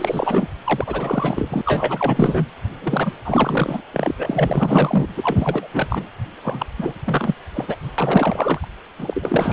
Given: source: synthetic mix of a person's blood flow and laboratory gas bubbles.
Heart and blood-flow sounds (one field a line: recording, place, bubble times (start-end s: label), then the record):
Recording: Doppler ultrasound of blood flow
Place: precordium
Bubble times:
0.00-0.48 s: bubbles
0.64-1.61 s: bubbles
1.65-2.46 s: bubbles
2.82-3.12 s: bubbles
3.25-3.81 s: bubbles
3.93-4.14 s: bubbles
4.17-5.08 s: bubbles
5.17-5.67 s: bubbles
5.73-6.08 s: bubbles
6.43-6.66 s: bubbles
6.77-6.99 s: bubbles
7.05-7.34 s: bubbles
7.54-7.76 s: bubbles
7.82-7.92 s: bubbles
7.98-8.67 s: bubbles
8.98-9.53 s: bubbles
From the record:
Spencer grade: 4 (maximum detectable bubble signal sounding continuously throughout systole and diastole of every cardiac period, and overriding the amplitude of the normal cardiac signals)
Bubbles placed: anywhere in the cardiac cycle